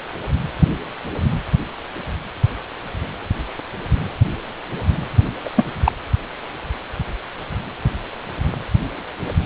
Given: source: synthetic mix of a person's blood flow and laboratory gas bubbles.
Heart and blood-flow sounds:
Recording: Doppler ultrasound of blood flow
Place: precordium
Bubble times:
5.45-5.50 s: bubbles
5.56-5.64 s: bubbles
5.84-5.92 s: bubbles
From the record:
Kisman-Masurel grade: 213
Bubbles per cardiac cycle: several, 3 to 8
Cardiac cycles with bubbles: 1 to 10%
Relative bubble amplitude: loud (0.450 to 0.775)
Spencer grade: 1 (occasional bubble signal discernible with the cardiac motion signal, with majority of cardiac periods free of bubbles)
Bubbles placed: anywhere in the cardiac cycle

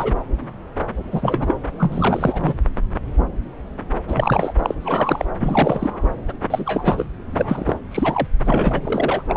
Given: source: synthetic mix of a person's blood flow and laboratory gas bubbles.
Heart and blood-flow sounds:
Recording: Doppler ultrasound of blood flow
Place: subclavian vein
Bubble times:
0.00-0.14 s: bubbles
1.11-1.57 s: bubbles
1.79-2.54 s: bubbles
4.07-4.53 s: bubbles
4.62-4.74 s: bubbles
4.80-5.25 s: bubbles
5.39-5.93 s: bubbles
6.28-6.33 s: bubbles
6.50-7.04 s: bubbles
7.33-7.79 s: bubbles
7.91-8.28 s: bubbles
8.44-8.81 s: bubbles
8.84-9.22 s: bubbles
9.29-9.37 s: bubbles
From the record:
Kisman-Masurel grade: 333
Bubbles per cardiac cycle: rolling drumbeat, 9 or more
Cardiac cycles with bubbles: 50 to 99%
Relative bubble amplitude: loud (0.450 to 0.775)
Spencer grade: 3 (all of the cardiac periods contain showers or single bubble signals, but not dominating or overriding the cardiac motion signals)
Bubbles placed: anywhere in the cardiac cycle

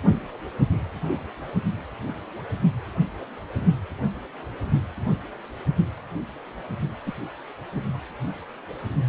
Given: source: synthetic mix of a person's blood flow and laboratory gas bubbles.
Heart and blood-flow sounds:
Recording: Doppler ultrasound of blood flow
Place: precordium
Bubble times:
7.06-7.12 s: bubbles
7.72-7.82 s: bubbles
From the record:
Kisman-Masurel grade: 111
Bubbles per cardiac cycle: 1 to 2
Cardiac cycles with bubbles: 1 to 10%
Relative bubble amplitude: barely perceptible (0.100 to 0.250)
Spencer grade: 1 (occasional bubble signal discernible with the cardiac motion signal, with majority of cardiac periods free of bubbles)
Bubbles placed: only in the low amplitude regions of the cardiac cycle

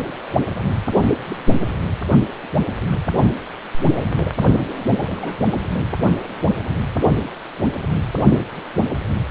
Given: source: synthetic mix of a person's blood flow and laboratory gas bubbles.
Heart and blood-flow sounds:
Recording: Doppler ultrasound of blood flow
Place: precordium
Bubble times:
1.28-1.36 s: bubbles
4.14-4.33 s: bubbles
5.17-5.47 s: bubbles
From the record:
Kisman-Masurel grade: 121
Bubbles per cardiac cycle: 1 to 2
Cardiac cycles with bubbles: 10 to 50%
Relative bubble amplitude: barely perceptible (0.100 to 0.250)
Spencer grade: 2 (many but less than half of the cardiac periods contain bubble signals, singularly or in groups)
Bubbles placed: only in the low amplitude regions of the cardiac cycle

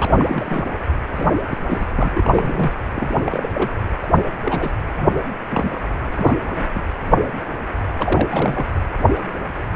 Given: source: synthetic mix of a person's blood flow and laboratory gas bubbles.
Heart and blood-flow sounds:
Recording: Doppler ultrasound of blood flow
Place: precordium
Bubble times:
0.00-0.79 s: bubbles
1.15-1.29 s: bubbles
1.49-1.58 s: bubbles
1.69-1.86 s: bubbles
1.95-2.71 s: bubbles
2.96-3.17 s: bubbles
3.24-3.69 s: bubbles
4.03-4.08 s: bubbles
4.18-4.25 s: bubbles
4.44-4.72 s: bubbles
4.97-5.08 s: bubbles
5.50-5.82 s: bubbles
6.16-6.37 s: bubbles
6.74-6.83 s: bubbles
7.96-8.65 s: bubbles
From the record:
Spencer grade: 3 (all of the cardiac periods contain showers or single bubble signals, but not dominating or overriding the cardiac motion signals)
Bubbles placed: anywhere in the cardiac cycle

